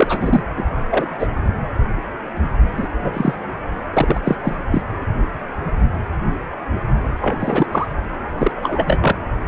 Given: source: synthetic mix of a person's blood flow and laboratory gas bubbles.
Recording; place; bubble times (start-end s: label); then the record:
Doppler ultrasound of blood flow; precordium
0.00-0.43 s: bubbles
0.57-0.65 s: bubbles
0.90-1.08 s: bubbles
1.19-1.28 s: bubbles
2.77-2.88 s: bubbles
3.04-3.34 s: bubbles
3.93-4.21 s: bubbles
4.25-4.38 s: bubbles
4.43-4.56 s: bubbles
4.70-4.81 s: bubbles
7.21-7.36 s: bubbles
7.39-7.67 s: bubbles
7.71-7.88 s: bubbles
8.38-8.51 s: bubbles
8.54-9.16 s: bubbles
From the record:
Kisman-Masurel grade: 233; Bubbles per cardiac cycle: several, 3 to 8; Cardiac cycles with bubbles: 50 to 99%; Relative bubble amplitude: loud (0.450 to 0.775); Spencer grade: 3 (all of the cardiac periods contain showers or single bubble signals, but not dominating or overriding the cardiac motion signals); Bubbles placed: anywhere in the cardiac cycle